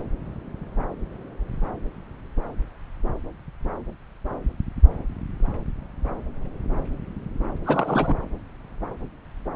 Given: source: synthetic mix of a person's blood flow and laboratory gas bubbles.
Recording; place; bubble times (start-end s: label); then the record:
Doppler ultrasound of blood flow; subclavian vein
7.64-8.15 s: bubbles
From the record:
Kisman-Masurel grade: 212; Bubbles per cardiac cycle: several, 3 to 8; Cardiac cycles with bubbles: 1 to 10%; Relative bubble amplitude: moderate (0.250 to 0.450); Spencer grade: 1 (occasional bubble signal discernible with the cardiac motion signal, with majority of cardiac periods free of bubbles); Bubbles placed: anywhere in the cardiac cycle